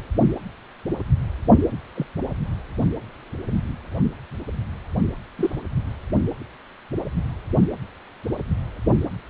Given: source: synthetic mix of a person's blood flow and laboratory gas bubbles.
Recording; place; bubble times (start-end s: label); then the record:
Doppler ultrasound of blood flow; precordium
1.95-2.06 s: bubbles
5.38-5.56 s: bubbles
From the record:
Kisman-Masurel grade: 121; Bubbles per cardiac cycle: 1 to 2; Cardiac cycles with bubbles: 10 to 50%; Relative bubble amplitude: barely perceptible (0.100 to 0.250); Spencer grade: 2 (many but less than half of the cardiac periods contain bubble signals, singularly or in groups); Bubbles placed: only in the low amplitude regions of the cardiac cycle